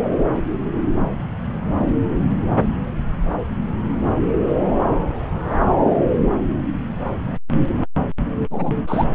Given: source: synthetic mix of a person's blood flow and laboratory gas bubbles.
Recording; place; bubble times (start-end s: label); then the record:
Doppler ultrasound of blood flow; subclavian vein
8.51-8.76 s: bubbles
8.87-9.05 s: bubbles
From the record:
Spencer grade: 1 (occasional bubble signal discernible with the cardiac motion signal, with majority of cardiac periods free of bubbles); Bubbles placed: anywhere in the cardiac cycle